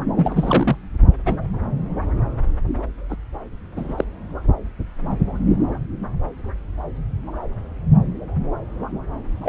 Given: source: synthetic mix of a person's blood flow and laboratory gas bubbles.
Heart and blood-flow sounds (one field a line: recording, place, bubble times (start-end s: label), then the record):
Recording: Doppler ultrasound of blood flow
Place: subclavian vein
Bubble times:
0.16-0.76 s: bubbles
1.25-1.35 s: bubbles
3.09-3.16 s: bubbles
3.76-4.05 s: bubbles
9.43-9.49 s: bubbles
From the record:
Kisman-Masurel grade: 222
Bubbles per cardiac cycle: several, 3 to 8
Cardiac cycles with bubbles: 10 to 50%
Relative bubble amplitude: moderate (0.250 to 0.450)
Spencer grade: 2 (many but less than half of the cardiac periods contain bubble signals, singularly or in groups)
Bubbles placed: anywhere in the cardiac cycle